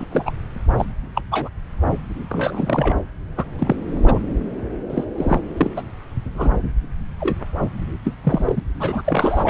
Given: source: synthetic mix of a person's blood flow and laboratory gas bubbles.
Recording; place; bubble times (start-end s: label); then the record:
Doppler ultrasound of blood flow; subclavian vein
0.00-0.06 s: bubbles
0.11-0.32 s: bubbles
0.77-0.85 s: bubbles
1.15-1.22 s: bubbles
1.31-1.49 s: bubbles
2.29-2.94 s: bubbles
3.37-3.44 s: bubbles
3.58-3.76 s: bubbles
4.04-4.20 s: bubbles
4.90-5.04 s: bubbles
5.18-5.40 s: bubbles
5.57-5.71 s: bubbles
5.76-5.82 s: bubbles
6.35-6.53 s: bubbles
7.19-7.47 s: bubbles
8.04-8.14 s: bubbles
8.24-8.60 s: bubbles
8.79-9.02 s: bubbles
9.04-9.49 s: bubbles
From the record:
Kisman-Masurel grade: 242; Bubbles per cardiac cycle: several, 3 to 8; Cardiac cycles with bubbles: 100%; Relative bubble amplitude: moderate (0.250 to 0.450); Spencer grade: 3 (all of the cardiac periods contain showers or single bubble signals, but not dominating or overriding the cardiac motion signals); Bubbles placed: anywhere in the cardiac cycle